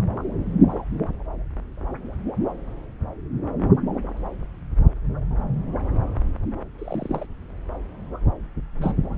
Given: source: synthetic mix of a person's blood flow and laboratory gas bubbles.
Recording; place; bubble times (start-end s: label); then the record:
Doppler ultrasound of blood flow; subclavian vein
6.78-7.26 s: bubbles
8.81-8.94 s: bubbles
From the record:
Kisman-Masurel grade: 121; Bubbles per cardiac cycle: 1 to 2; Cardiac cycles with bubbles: 10 to 50%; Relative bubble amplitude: barely perceptible (0.100 to 0.250); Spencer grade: 2 (many but less than half of the cardiac periods contain bubble signals, singularly or in groups); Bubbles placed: anywhere in the cardiac cycle